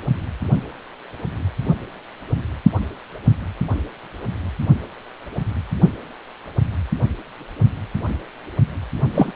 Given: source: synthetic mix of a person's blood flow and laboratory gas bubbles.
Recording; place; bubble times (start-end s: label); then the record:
Doppler ultrasound of blood flow; precordium
9.14-9.31 s: bubbles
From the record:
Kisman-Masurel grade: 213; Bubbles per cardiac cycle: several, 3 to 8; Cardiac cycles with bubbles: 1 to 10%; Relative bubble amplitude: loud (0.450 to 0.775); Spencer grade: 1 (occasional bubble signal discernible with the cardiac motion signal, with majority of cardiac periods free of bubbles); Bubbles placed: only in the low amplitude regions of the cardiac cycle